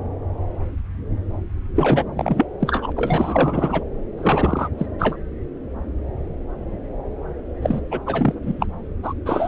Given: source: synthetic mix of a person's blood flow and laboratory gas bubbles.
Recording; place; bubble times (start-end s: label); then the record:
Doppler ultrasound of blood flow; subclavian vein
1.75-2.04 s: bubbles
2.16-2.46 s: bubbles
2.60-2.92 s: bubbles
2.96-3.83 s: bubbles
4.17-4.68 s: bubbles
4.78-4.87 s: bubbles
4.99-5.17 s: bubbles
7.62-7.80 s: bubbles
7.91-8.00 s: bubbles
8.06-8.35 s: bubbles
8.42-8.66 s: bubbles
9.03-9.13 s: bubbles
9.26-9.48 s: bubbles
From the record:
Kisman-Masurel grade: 333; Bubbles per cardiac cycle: rolling drumbeat, 9 or more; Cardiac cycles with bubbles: 50 to 99%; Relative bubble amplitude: loud (0.450 to 0.775); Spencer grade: 3 (all of the cardiac periods contain showers or single bubble signals, but not dominating or overriding the cardiac motion signals); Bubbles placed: anywhere in the cardiac cycle